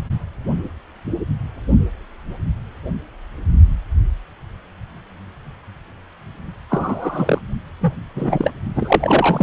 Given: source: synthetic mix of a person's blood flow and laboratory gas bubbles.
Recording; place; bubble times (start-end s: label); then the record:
Doppler ultrasound of blood flow; precordium
6.70-7.38 s: bubbles
7.80-7.94 s: bubbles
8.14-8.52 s: bubbles
8.75-9.43 s: bubbles
From the record:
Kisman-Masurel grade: 223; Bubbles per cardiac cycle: several, 3 to 8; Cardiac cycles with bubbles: 10 to 50%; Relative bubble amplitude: loud (0.450 to 0.775); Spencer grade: 2 (many but less than half of the cardiac periods contain bubble signals, singularly or in groups); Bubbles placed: only in the low amplitude regions of the cardiac cycle